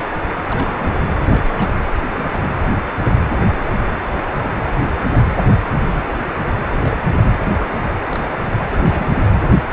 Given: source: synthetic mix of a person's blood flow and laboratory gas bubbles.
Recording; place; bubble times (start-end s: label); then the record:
Doppler ultrasound of blood flow; precordium
0.50-0.90 s: bubbles
1.27-1.72 s: bubbles
2.14-2.48 s: bubbles
4.63-4.74 s: bubbles
5.12-5.24 s: bubbles
5.27-5.40 s: bubbles
6.74-6.81 s: bubbles
6.85-7.08 s: bubbles
7.14-7.24 s: bubbles
8.05-8.31 s: bubbles
8.69-9.13 s: bubbles
From the record:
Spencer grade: 2 (many but less than half of the cardiac periods contain bubble signals, singularly or in groups); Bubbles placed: anywhere in the cardiac cycle